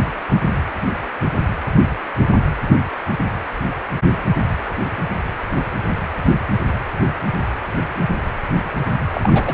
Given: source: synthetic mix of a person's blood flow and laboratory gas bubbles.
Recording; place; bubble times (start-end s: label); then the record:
Doppler ultrasound of blood flow; precordium
9.13-9.54 s: bubbles
From the record:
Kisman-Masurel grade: 212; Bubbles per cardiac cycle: several, 3 to 8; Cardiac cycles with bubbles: 1 to 10%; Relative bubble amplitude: moderate (0.250 to 0.450); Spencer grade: 1 (occasional bubble signal discernible with the cardiac motion signal, with majority of cardiac periods free of bubbles); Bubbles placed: anywhere in the cardiac cycle